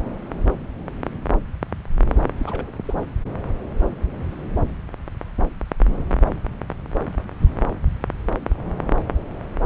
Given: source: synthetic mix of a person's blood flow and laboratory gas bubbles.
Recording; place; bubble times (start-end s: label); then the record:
Doppler ultrasound of blood flow; subclavian vein
2.39-2.71 s: bubbles
2.85-3.02 s: bubbles
From the record:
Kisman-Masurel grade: 211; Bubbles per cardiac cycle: several, 3 to 8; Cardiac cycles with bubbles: 1 to 10%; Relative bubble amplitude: barely perceptible (0.100 to 0.250); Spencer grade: 1 (occasional bubble signal discernible with the cardiac motion signal, with majority of cardiac periods free of bubbles); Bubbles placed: anywhere in the cardiac cycle